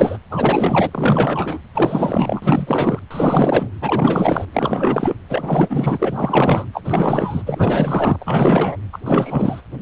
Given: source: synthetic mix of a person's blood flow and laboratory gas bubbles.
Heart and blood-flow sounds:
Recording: Doppler ultrasound of blood flow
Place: precordium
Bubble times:
0.00-0.17 s: bubbles
0.30-0.90 s: bubbles
0.92-1.59 s: bubbles
1.73-3.00 s: bubbles
3.10-3.69 s: bubbles
3.81-4.45 s: bubbles
4.53-5.16 s: bubbles
5.29-6.66 s: bubbles
6.73-6.82 s: bubbles
6.84-7.42 s: bubbles
7.46-8.17 s: bubbles
8.20-8.77 s: bubbles
8.93-8.98 s: bubbles
9.05-9.62 s: bubbles
From the record:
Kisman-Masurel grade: 444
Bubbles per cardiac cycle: continuous sound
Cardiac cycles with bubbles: 100%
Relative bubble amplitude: maximal (0.775 to 0.999)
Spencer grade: 4 (maximum detectable bubble signal sounding continuously throughout systole and diastole of every cardiac period, and overriding the amplitude of the normal cardiac signals)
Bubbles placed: anywhere in the cardiac cycle

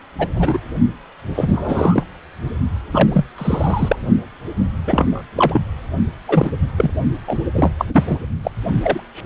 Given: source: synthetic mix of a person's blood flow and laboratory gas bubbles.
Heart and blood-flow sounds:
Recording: Doppler ultrasound of blood flow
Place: precordium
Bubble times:
0.18-0.28 s: bubbles
0.36-0.59 s: bubbles
1.34-2.04 s: bubbles
2.90-3.25 s: bubbles
3.38-3.96 s: bubbles
4.87-5.23 s: bubbles
5.36-5.62 s: bubbles
6.27-6.51 s: bubbles
6.76-6.91 s: bubbles
7.27-7.39 s: bubbles
7.54-7.72 s: bubbles
7.79-7.85 s: bubbles
7.92-8.16 s: bubbles
8.43-8.51 s: bubbles
8.82-9.00 s: bubbles
From the record:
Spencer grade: 3 (all of the cardiac periods contain showers or single bubble signals, but not dominating or overriding the cardiac motion signals)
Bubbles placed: only in the low amplitude regions of the cardiac cycle

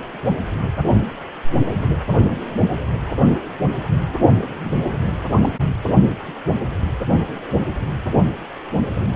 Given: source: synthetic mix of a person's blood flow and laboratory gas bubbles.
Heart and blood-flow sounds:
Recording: Doppler ultrasound of blood flow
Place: precordium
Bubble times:
4.65-4.73 s: bubbles
5.41-5.49 s: bubbles
From the record:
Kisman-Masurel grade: 111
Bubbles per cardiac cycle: 1 to 2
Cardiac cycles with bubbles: 1 to 10%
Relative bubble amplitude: barely perceptible (0.100 to 0.250)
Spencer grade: 1 (occasional bubble signal discernible with the cardiac motion signal, with majority of cardiac periods free of bubbles)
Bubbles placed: only in the low amplitude regions of the cardiac cycle

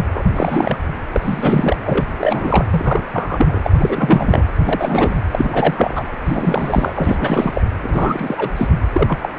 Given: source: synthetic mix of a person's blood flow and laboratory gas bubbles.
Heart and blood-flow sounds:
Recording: Doppler ultrasound of blood flow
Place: precordium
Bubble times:
0.13-0.23 s: bubbles
0.35-0.77 s: bubbles
1.12-1.77 s: bubbles
1.85-2.05 s: bubbles
2.18-2.65 s: bubbles
2.71-3.03 s: bubbles
3.13-3.59 s: bubbles
3.64-3.71 s: bubbles
3.77-4.45 s: bubbles
4.65-5.15 s: bubbles
5.31-6.08 s: bubbles
6.25-6.93 s: bubbles
6.96-7.61 s: bubbles
7.82-8.51 s: bubbles
8.56-8.66 s: bubbles
8.93-9.18 s: bubbles
9.22-9.29 s: bubbles
From the record:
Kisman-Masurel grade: 343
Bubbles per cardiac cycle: rolling drumbeat, 9 or more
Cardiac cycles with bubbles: 100%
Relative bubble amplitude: loud (0.450 to 0.775)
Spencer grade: 3 (all of the cardiac periods contain showers or single bubble signals, but not dominating or overriding the cardiac motion signals)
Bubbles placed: anywhere in the cardiac cycle

